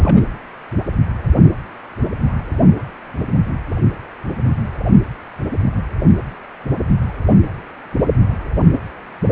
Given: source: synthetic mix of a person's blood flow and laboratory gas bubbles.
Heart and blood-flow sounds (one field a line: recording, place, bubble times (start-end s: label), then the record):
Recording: Doppler ultrasound of blood flow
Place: precordium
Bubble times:
0.00-0.23 s: bubbles
From the record:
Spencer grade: 1 (occasional bubble signal discernible with the cardiac motion signal, with majority of cardiac periods free of bubbles)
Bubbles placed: anywhere in the cardiac cycle